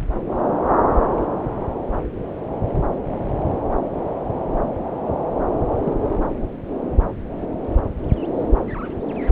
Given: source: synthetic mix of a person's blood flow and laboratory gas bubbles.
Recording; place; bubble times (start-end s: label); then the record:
Doppler ultrasound of blood flow; subclavian vein
5.83-5.93 s: bubbles
From the record:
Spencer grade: 1 (occasional bubble signal discernible with the cardiac motion signal, with majority of cardiac periods free of bubbles); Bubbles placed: anywhere in the cardiac cycle